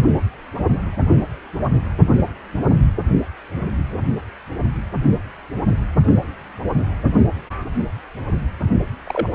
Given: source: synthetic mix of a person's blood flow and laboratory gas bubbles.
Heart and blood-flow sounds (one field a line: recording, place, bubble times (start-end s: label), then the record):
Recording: Doppler ultrasound of blood flow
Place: precordium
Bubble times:
9.06-9.28 s: bubbles
From the record:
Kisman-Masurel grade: 112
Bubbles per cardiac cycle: 1 to 2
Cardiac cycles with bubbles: 1 to 10%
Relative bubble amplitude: moderate (0.250 to 0.450)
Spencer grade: 1 (occasional bubble signal discernible with the cardiac motion signal, with majority of cardiac periods free of bubbles)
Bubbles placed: only in the low amplitude regions of the cardiac cycle